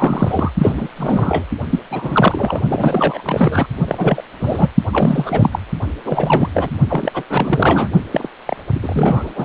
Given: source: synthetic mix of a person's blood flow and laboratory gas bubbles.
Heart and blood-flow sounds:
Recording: Doppler ultrasound of blood flow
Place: precordium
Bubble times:
0.00-0.51 s: bubbles
0.57-0.88 s: bubbles
0.96-1.45 s: bubbles
1.70-1.80 s: bubbles
1.91-2.61 s: bubbles
2.68-3.67 s: bubbles
3.88-4.22 s: bubbles
4.40-4.68 s: bubbles
4.92-5.59 s: bubbles
6.04-6.49 s: bubbles
6.54-6.70 s: bubbles
6.88-7.23 s: bubbles
7.29-7.88 s: bubbles
8.11-8.29 s: bubbles
8.46-8.56 s: bubbles
8.74-8.79 s: bubbles
8.82-9.45 s: bubbles
From the record:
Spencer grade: 3 (all of the cardiac periods contain showers or single bubble signals, but not dominating or overriding the cardiac motion signals)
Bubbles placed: only in the low amplitude regions of the cardiac cycle

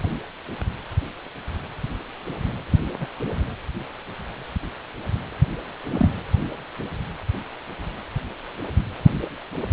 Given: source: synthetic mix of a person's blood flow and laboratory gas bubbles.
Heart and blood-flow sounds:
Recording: Doppler ultrasound of blood flow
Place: precordium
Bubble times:
3.00-3.07 s: bubbles
5.93-6.10 s: bubbles
From the record:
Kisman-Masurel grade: 122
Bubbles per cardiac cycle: 1 to 2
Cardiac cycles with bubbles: 10 to 50%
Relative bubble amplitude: moderate (0.250 to 0.450)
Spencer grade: 2 (many but less than half of the cardiac periods contain bubble signals, singularly or in groups)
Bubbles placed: anywhere in the cardiac cycle

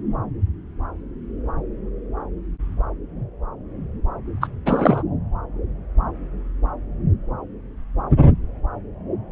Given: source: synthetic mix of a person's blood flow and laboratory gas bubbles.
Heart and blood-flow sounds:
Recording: Doppler ultrasound of blood flow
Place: subclavian vein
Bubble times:
4.41-4.47 s: bubbles
4.65-5.03 s: bubbles
From the record:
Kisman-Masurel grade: 213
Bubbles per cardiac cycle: several, 3 to 8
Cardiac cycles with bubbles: 1 to 10%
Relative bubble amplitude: loud (0.450 to 0.775)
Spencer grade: 1 (occasional bubble signal discernible with the cardiac motion signal, with majority of cardiac periods free of bubbles)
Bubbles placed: anywhere in the cardiac cycle

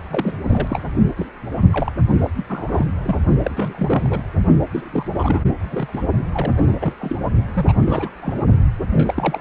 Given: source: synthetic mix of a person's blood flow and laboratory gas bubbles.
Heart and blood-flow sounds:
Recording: Doppler ultrasound of blood flow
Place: precordium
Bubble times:
0.03-0.35 s: bubbles
0.46-0.82 s: bubbles
1.17-1.30 s: bubbles
1.73-1.92 s: bubbles
2.19-2.30 s: bubbles
2.37-2.45 s: bubbles
2.48-2.86 s: bubbles
3.02-3.23 s: bubbles
3.43-3.52 s: bubbles
3.56-4.22 s: bubbles
4.71-5.43 s: bubbles
5.47-5.55 s: bubbles
5.59-6.01 s: bubbles
6.33-6.76 s: bubbles
6.79-6.94 s: bubbles
6.99-7.16 s: bubbles
7.54-7.73 s: bubbles
7.80-8.10 s: bubbles
8.21-8.34 s: bubbles
8.92-9.41 s: bubbles
From the record:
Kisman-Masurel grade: 342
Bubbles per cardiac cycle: rolling drumbeat, 9 or more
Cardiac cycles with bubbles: 100%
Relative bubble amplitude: moderate (0.250 to 0.450)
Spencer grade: 3 (all of the cardiac periods contain showers or single bubble signals, but not dominating or overriding the cardiac motion signals)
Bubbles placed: only in the low amplitude regions of the cardiac cycle

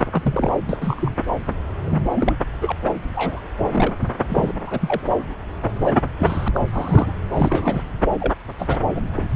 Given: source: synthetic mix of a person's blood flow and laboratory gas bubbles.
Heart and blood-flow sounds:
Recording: Doppler ultrasound of blood flow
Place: subclavian vein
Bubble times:
0.00-0.06 s: bubbles
0.12-0.52 s: bubbles
0.69-0.77 s: bubbles
0.81-1.16 s: bubbles
1.86-1.99 s: bubbles
2.15-2.35 s: bubbles
2.61-2.72 s: bubbles
2.84-2.94 s: bubbles
3.15-3.40 s: bubbles
3.75-3.94 s: bubbles
4.29-4.54 s: bubbles
4.67-5.12 s: bubbles
5.61-5.71 s: bubbles
5.83-6.03 s: bubbles
6.18-6.48 s: bubbles
6.54-6.60 s: bubbles
6.72-7.12 s: bubbles
7.33-7.82 s: bubbles
8.20-8.33 s: bubbles
8.58-8.77 s: bubbles
8.95-9.02 s: bubbles
9.15-9.29 s: bubbles
From the record:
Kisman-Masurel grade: 242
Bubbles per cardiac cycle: several, 3 to 8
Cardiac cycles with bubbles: 100%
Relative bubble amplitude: moderate (0.250 to 0.450)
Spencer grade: 3 (all of the cardiac periods contain showers or single bubble signals, but not dominating or overriding the cardiac motion signals)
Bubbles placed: anywhere in the cardiac cycle

